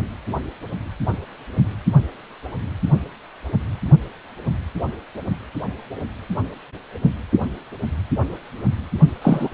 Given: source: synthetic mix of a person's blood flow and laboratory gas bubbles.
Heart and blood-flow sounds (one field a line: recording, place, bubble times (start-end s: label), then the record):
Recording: Doppler ultrasound of blood flow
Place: precordium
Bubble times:
9.21-9.49 s: bubbles
From the record:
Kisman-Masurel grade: 113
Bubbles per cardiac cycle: 1 to 2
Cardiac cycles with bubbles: 1 to 10%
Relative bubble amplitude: loud (0.450 to 0.775)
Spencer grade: 1 (occasional bubble signal discernible with the cardiac motion signal, with majority of cardiac periods free of bubbles)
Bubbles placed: only in the low amplitude regions of the cardiac cycle